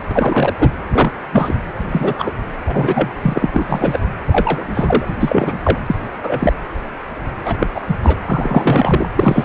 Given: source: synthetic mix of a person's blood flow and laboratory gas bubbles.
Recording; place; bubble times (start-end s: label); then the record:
Doppler ultrasound of blood flow; precordium
0.10-0.54 s: bubbles
0.58-0.72 s: bubbles
0.92-1.11 s: bubbles
1.32-1.54 s: bubbles
1.76-1.78 s: bubbles
1.91-2.14 s: bubbles
2.19-2.31 s: bubbles
2.67-3.13 s: bubbles
3.22-3.48 s: bubbles
3.54-3.99 s: bubbles
4.27-5.15 s: bubbles
5.20-5.53 s: bubbles
5.64-5.79 s: bubbles
5.86-5.96 s: bubbles
6.22-6.53 s: bubbles
7.45-7.67 s: bubbles
7.74-7.81 s: bubbles
7.86-7.96 s: bubbles
8.03-8.17 s: bubbles
8.25-9.07 s: bubbles
9.15-9.45 s: bubbles
From the record:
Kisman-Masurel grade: 233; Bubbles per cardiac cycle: several, 3 to 8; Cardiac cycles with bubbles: 50 to 99%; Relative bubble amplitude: loud (0.450 to 0.775); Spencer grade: 3 (all of the cardiac periods contain showers or single bubble signals, but not dominating or overriding the cardiac motion signals); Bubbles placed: anywhere in the cardiac cycle